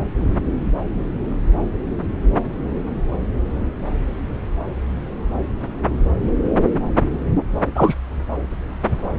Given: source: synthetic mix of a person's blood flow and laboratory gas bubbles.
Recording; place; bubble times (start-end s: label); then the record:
Doppler ultrasound of blood flow; subclavian vein
7.75-7.95 s: bubbles
From the record:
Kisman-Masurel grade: 213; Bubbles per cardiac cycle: several, 3 to 8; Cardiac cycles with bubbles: 1 to 10%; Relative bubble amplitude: loud (0.450 to 0.775); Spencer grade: 1 (occasional bubble signal discernible with the cardiac motion signal, with majority of cardiac periods free of bubbles); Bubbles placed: anywhere in the cardiac cycle